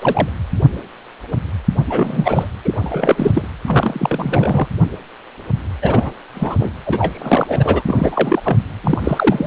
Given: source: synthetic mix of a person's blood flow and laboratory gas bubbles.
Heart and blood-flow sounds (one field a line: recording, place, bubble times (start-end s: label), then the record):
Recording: Doppler ultrasound of blood flow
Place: precordium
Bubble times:
0.01-0.29 s: bubbles
1.86-2.48 s: bubbles
2.64-3.48 s: bubbles
3.67-4.68 s: bubbles
5.82-6.12 s: bubbles
6.35-6.56 s: bubbles
6.59-6.71 s: bubbles
6.86-7.82 s: bubbles
7.85-8.41 s: bubbles
8.44-8.57 s: bubbles
8.83-9.01 s: bubbles
9.04-9.47 s: bubbles
From the record:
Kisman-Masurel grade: 333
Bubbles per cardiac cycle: rolling drumbeat, 9 or more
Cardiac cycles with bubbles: 50 to 99%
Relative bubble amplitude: loud (0.450 to 0.775)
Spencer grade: 3 (all of the cardiac periods contain showers or single bubble signals, but not dominating or overriding the cardiac motion signals)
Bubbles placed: anywhere in the cardiac cycle